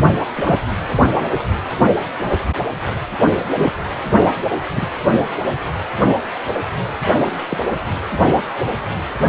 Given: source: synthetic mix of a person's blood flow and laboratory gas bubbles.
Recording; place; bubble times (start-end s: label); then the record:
Doppler ultrasound of blood flow; precordium
0.34-0.61 s: bubbles
3.54-3.70 s: bubbles
4.76-4.88 s: bubbles
7.49-7.58 s: bubbles
From the record:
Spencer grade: 2 (many but less than half of the cardiac periods contain bubble signals, singularly or in groups); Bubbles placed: anywhere in the cardiac cycle